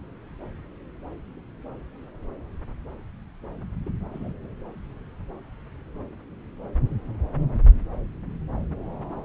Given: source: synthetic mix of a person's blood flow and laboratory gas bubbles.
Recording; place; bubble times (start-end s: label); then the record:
Doppler ultrasound of blood flow; subclavian vein
3.85-3.90 s: bubbles
4.13-4.32 s: bubbles
From the record:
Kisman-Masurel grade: 111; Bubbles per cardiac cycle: 1 to 2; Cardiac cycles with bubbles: 1 to 10%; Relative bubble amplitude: barely perceptible (0.100 to 0.250); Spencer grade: 1 (occasional bubble signal discernible with the cardiac motion signal, with majority of cardiac periods free of bubbles); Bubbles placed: anywhere in the cardiac cycle